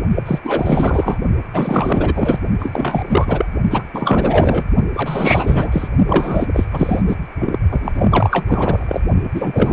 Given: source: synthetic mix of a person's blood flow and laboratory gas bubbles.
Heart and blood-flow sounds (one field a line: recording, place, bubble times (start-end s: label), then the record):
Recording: Doppler ultrasound of blood flow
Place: precordium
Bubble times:
0.14-0.23 s: bubbles
0.26-0.39 s: bubbles
0.43-1.18 s: bubbles
1.53-2.40 s: bubbles
2.60-3.04 s: bubbles
3.08-3.46 s: bubbles
3.71-3.83 s: bubbles
3.94-4.64 s: bubbles
4.93-5.88 s: bubbles
6.08-6.46 s: bubbles
6.53-6.67 s: bubbles
6.72-7.01 s: bubbles
7.07-7.16 s: bubbles
7.39-7.58 s: bubbles
7.71-9.01 s: bubbles
9.35-9.73 s: bubbles
From the record:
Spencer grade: 4 (maximum detectable bubble signal sounding continuously throughout systole and diastole of every cardiac period, and overriding the amplitude of the normal cardiac signals)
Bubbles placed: only in the low amplitude regions of the cardiac cycle